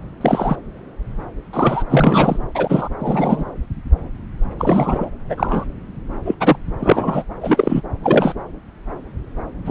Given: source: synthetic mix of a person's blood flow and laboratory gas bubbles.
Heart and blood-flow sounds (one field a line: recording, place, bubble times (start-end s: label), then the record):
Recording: Doppler ultrasound of blood flow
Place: subclavian vein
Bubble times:
0.21-0.56 s: bubbles
1.53-1.84 s: bubbles
1.89-2.40 s: bubbles
2.54-2.88 s: bubbles
2.99-3.44 s: bubbles
4.58-5.10 s: bubbles
5.29-5.64 s: bubbles
6.25-6.35 s: bubbles
6.40-6.57 s: bubbles
6.80-7.23 s: bubbles
7.41-7.82 s: bubbles
8.03-8.34 s: bubbles
9.66-9.71 s: bubbles
From the record:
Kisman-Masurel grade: 233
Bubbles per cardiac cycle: several, 3 to 8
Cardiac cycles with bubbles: 50 to 99%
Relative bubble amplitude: loud (0.450 to 0.775)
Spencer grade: 3 (all of the cardiac periods contain showers or single bubble signals, but not dominating or overriding the cardiac motion signals)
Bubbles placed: anywhere in the cardiac cycle